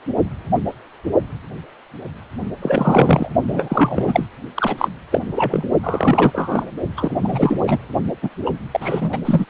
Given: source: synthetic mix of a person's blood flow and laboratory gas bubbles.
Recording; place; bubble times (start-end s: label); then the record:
Doppler ultrasound of blood flow; precordium
2.62-3.29 s: bubbles
3.47-4.26 s: bubbles
4.54-4.88 s: bubbles
5.12-5.21 s: bubbles
5.35-5.63 s: bubbles
5.83-6.71 s: bubbles
6.96-7.17 s: bubbles
7.22-7.78 s: bubbles
8.22-8.29 s: bubbles
8.45-8.50 s: bubbles
8.71-9.18 s: bubbles
9.25-9.45 s: bubbles
From the record:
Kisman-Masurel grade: 333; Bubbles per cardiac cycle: rolling drumbeat, 9 or more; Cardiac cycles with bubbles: 50 to 99%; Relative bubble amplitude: loud (0.450 to 0.775); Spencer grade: 3 (all of the cardiac periods contain showers or single bubble signals, but not dominating or overriding the cardiac motion signals); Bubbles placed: only in the low amplitude regions of the cardiac cycle